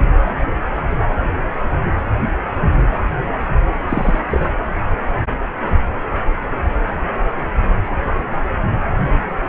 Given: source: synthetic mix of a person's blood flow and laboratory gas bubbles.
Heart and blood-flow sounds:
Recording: Doppler ultrasound of blood flow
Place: precordium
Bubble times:
3.89-4.19 s: bubbles
4.29-4.49 s: bubbles
From the record:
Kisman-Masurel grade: 212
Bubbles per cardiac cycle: several, 3 to 8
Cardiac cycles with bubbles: 1 to 10%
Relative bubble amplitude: moderate (0.250 to 0.450)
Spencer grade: 1 (occasional bubble signal discernible with the cardiac motion signal, with majority of cardiac periods free of bubbles)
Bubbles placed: anywhere in the cardiac cycle

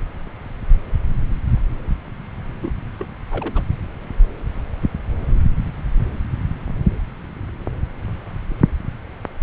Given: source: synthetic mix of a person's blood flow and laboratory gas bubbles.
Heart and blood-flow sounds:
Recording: Doppler ultrasound of blood flow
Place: subclavian vein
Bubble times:
2.62-2.72 s: bubbles
3.00-3.05 s: bubbles
3.30-3.65 s: bubbles
From the record:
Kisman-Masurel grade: 211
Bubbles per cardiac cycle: several, 3 to 8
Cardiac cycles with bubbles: 1 to 10%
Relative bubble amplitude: barely perceptible (0.100 to 0.250)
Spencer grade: 1 (occasional bubble signal discernible with the cardiac motion signal, with majority of cardiac periods free of bubbles)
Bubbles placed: anywhere in the cardiac cycle

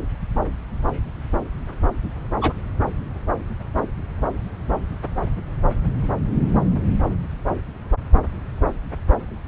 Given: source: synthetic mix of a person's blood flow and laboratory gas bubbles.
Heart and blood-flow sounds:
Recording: Doppler ultrasound of blood flow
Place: subclavian vein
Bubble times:
2.41-2.53 s: bubbles
From the record:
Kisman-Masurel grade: 113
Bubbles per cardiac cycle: 1 to 2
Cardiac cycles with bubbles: 1 to 10%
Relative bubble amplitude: loud (0.450 to 0.775)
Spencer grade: 1 (occasional bubble signal discernible with the cardiac motion signal, with majority of cardiac periods free of bubbles)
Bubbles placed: anywhere in the cardiac cycle

